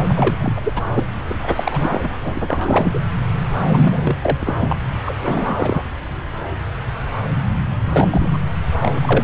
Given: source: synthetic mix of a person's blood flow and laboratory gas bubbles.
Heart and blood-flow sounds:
Doppler ultrasound of blood flow; subclavian vein
0.09-0.36 s: bubbles
0.40-0.72 s: bubbles
0.75-0.82 s: bubbles
0.94-1.03 s: bubbles
1.28-1.35 s: bubbles
1.43-2.99 s: bubbles
3.72-4.16 s: bubbles
4.21-4.54 s: bubbles
4.58-4.81 s: bubbles
4.88-4.92 s: bubbles
5.05-5.14 s: bubbles
5.22-5.83 s: bubbles
7.92-8.08 s: bubbles
8.11-8.38 s: bubbles
8.80-9.24 s: bubbles
From the record:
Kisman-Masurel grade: 332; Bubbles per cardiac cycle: rolling drumbeat, 9 or more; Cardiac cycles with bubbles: 50 to 99%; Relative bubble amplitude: moderate (0.250 to 0.450); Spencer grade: 3 (all of the cardiac periods contain showers or single bubble signals, but not dominating or overriding the cardiac motion signals); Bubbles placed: anywhere in the cardiac cycle

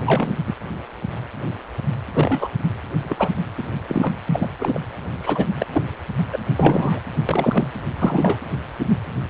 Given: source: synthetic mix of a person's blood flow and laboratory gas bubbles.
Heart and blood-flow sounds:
Doppler ultrasound of blood flow; precordium
0.01-0.37 s: bubbles
0.47-0.54 s: bubbles
2.13-2.48 s: bubbles
3.04-3.29 s: bubbles
3.57-3.63 s: bubbles
3.88-4.17 s: bubbles
4.26-4.48 s: bubbles
4.59-4.80 s: bubbles
5.21-5.47 s: bubbles
5.60-5.65 s: bubbles
5.73-5.83 s: bubbles
6.32-6.38 s: bubbles
6.56-6.99 s: bubbles
7.28-7.67 s: bubbles
7.99-8.38 s: bubbles
From the record:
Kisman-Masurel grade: 233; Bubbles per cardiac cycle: several, 3 to 8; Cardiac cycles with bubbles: 50 to 99%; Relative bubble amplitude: loud (0.450 to 0.775); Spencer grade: 3 (all of the cardiac periods contain showers or single bubble signals, but not dominating or overriding the cardiac motion signals); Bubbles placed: anywhere in the cardiac cycle

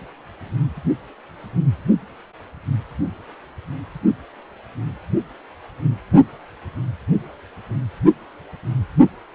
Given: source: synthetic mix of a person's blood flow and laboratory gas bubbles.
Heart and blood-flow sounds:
Doppler ultrasound of blood flow; precordium
no bubbles
From the record:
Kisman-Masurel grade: 000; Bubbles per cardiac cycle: 0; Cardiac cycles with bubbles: 0%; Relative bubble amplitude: no bubbles discernible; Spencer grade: 0 (complete lack of bubble signals)

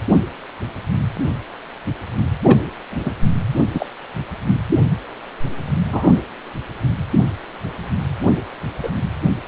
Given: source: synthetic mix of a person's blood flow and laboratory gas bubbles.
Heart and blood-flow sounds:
Doppler ultrasound of blood flow; precordium
2.44-2.60 s: bubbles
2.90-3.12 s: bubbles
3.73-3.86 s: bubbles
5.91-6.20 s: bubbles
6.82-6.94 s: bubbles
8.82-8.91 s: bubbles
From the record:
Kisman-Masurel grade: 123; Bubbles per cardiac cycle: 1 to 2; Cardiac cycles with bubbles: 10 to 50%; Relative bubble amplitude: loud (0.450 to 0.775); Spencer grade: 2 (many but less than half of the cardiac periods contain bubble signals, singularly or in groups); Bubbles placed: anywhere in the cardiac cycle

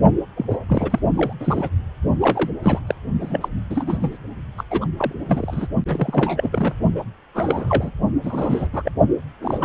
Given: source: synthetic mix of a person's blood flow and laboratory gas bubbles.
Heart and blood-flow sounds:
Doppler ultrasound of blood flow; precordium
0.36-0.46 s: bubbles
0.50-0.56 s: bubbles
0.68-0.99 s: bubbles
1.16-1.33 s: bubbles
1.40-1.70 s: bubbles
2.20-2.51 s: bubbles
2.62-2.80 s: bubbles
2.87-2.95 s: bubbles
3.20-3.49 s: bubbles
3.70-4.17 s: bubbles
4.58-4.64 s: bubbles
4.70-4.85 s: bubbles
4.98-5.13 s: bubbles
5.26-5.67 s: bubbles
5.86-6.73 s: bubbles
6.95-7.04 s: bubbles
7.34-7.91 s: bubbles
8.24-8.68 s: bubbles
8.72-8.92 s: bubbles
9.42-9.65 s: bubbles
From the record:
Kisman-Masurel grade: 342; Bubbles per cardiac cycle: rolling drumbeat, 9 or more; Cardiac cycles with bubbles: 100%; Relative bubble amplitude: moderate (0.250 to 0.450); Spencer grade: 3 (all of the cardiac periods contain showers or single bubble signals, but not dominating or overriding the cardiac motion signals); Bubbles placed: only in the low amplitude regions of the cardiac cycle

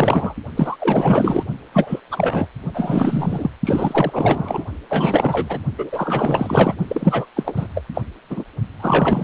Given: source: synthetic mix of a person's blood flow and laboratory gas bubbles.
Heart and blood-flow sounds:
Doppler ultrasound of blood flow; precordium
0.00-0.35 s: bubbles
0.55-0.76 s: bubbles
0.80-1.43 s: bubbles
1.72-2.00 s: bubbles
2.11-2.48 s: bubbles
2.74-3.50 s: bubbles
3.65-4.66 s: bubbles
4.90-5.59 s: bubbles
5.78-6.75 s: bubbles
6.88-7.25 s: bubbles
7.36-7.68 s: bubbles
7.75-7.83 s: bubbles
7.94-8.02 s: bubbles
8.29-8.44 s: bubbles
8.79-9.23 s: bubbles
From the record:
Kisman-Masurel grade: 444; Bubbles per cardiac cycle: continuous sound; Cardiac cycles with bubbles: 100%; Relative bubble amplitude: maximal (0.775 to 0.999); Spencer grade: 4 (maximum detectable bubble signal sounding continuously throughout systole and diastole of every cardiac period, and overriding the amplitude of the normal cardiac signals); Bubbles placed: only in the low amplitude regions of the cardiac cycle

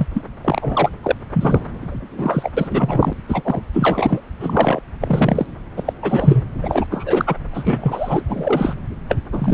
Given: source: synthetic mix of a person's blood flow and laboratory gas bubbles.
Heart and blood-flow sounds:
Doppler ultrasound of blood flow; subclavian vein
0.00-0.07 s: bubbles
0.13-0.22 s: bubbles
0.44-0.98 s: bubbles
1.02-1.12 s: bubbles
1.33-1.60 s: bubbles
1.81-2.50 s: bubbles
2.56-3.13 s: bubbles
3.28-3.61 s: bubbles
3.73-4.21 s: bubbles
4.39-4.80 s: bubbles
5.00-5.46 s: bubbles
5.76-5.93 s: bubbles
6.01-6.50 s: bubbles
6.62-6.86 s: bubbles
6.91-7.34 s: bubbles
7.50-8.23 s: bubbles
8.28-8.76 s: bubbles
9.08-9.17 s: bubbles
9.32-9.54 s: bubbles
From the record:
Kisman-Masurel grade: 243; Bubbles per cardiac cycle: several, 3 to 8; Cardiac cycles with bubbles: 100%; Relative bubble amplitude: loud (0.450 to 0.775); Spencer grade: 3 (all of the cardiac periods contain showers or single bubble signals, but not dominating or overriding the cardiac motion signals); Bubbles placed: anywhere in the cardiac cycle

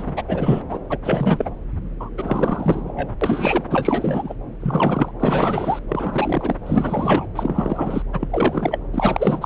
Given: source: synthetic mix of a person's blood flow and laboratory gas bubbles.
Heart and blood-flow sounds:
Doppler ultrasound of blood flow; subclavian vein
0.00-0.13 s: bubbles
0.16-0.22 s: bubbles
0.27-0.61 s: bubbles
0.69-0.79 s: bubbles
0.90-0.98 s: bubbles
1.03-1.50 s: bubbles
2.00-2.09 s: bubbles
2.17-3.15 s: bubbles
3.21-3.65 s: bubbles
3.70-4.34 s: bubbles
4.62-5.11 s: bubbles
5.20-5.79 s: bubbles
5.88-6.55 s: bubbles
6.66-7.27 s: bubbles
7.35-8.02 s: bubbles
8.13-8.79 s: bubbles
8.93-9.46 s: bubbles
From the record:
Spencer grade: 3 (all of the cardiac periods contain showers or single bubble signals, but not dominating or overriding the cardiac motion signals); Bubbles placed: anywhere in the cardiac cycle

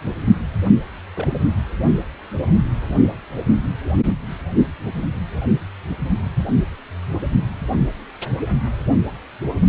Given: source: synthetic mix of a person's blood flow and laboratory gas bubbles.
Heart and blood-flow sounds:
Doppler ultrasound of blood flow; precordium
1.14-1.28 s: bubbles
From the record:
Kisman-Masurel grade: 111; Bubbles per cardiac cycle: 1 to 2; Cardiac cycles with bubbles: 1 to 10%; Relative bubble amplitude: barely perceptible (0.100 to 0.250); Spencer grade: 1 (occasional bubble signal discernible with the cardiac motion signal, with majority of cardiac periods free of bubbles); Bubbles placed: anywhere in the cardiac cycle

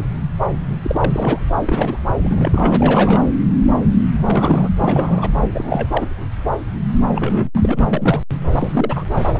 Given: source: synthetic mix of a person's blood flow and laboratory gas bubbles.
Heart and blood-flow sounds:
Doppler ultrasound of blood flow; subclavian vein
0.84-1.42 s: bubbles
1.56-1.97 s: bubbles
2.17-3.27 s: bubbles
4.15-4.68 s: bubbles
4.76-5.31 s: bubbles
5.52-6.07 s: bubbles
7.11-7.50 s: bubbles
7.56-7.84 s: bubbles
7.93-8.23 s: bubbles
8.59-9.05 s: bubbles
9.11-9.40 s: bubbles
From the record:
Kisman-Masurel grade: 332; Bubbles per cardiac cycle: rolling drumbeat, 9 or more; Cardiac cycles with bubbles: 50 to 99%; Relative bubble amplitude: moderate (0.250 to 0.450); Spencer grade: 3 (all of the cardiac periods contain showers or single bubble signals, but not dominating or overriding the cardiac motion signals); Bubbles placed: anywhere in the cardiac cycle

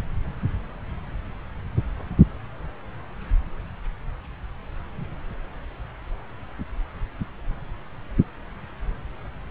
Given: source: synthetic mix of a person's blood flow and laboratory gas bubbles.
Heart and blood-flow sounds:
Doppler ultrasound of blood flow; subclavian vein
no bubbles
From the record:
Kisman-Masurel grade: 000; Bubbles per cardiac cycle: 0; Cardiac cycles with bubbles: 0%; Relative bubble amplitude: no bubbles discernible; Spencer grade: 0 (complete lack of bubble signals)

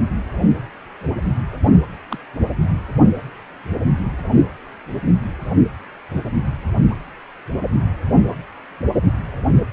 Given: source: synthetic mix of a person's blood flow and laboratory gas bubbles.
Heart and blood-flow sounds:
Doppler ultrasound of blood flow; precordium
2.10-2.18 s: bubbles
From the record:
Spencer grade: 1 (occasional bubble signal discernible with the cardiac motion signal, with majority of cardiac periods free of bubbles); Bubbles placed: anywhere in the cardiac cycle

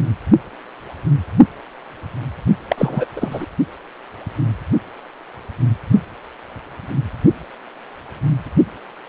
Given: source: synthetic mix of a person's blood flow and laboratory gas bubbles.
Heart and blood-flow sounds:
Doppler ultrasound of blood flow; precordium
2.68-3.06 s: bubbles
3.16-3.45 s: bubbles
From the record:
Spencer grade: 1 (occasional bubble signal discernible with the cardiac motion signal, with majority of cardiac periods free of bubbles); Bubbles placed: only in the low amplitude regions of the cardiac cycle

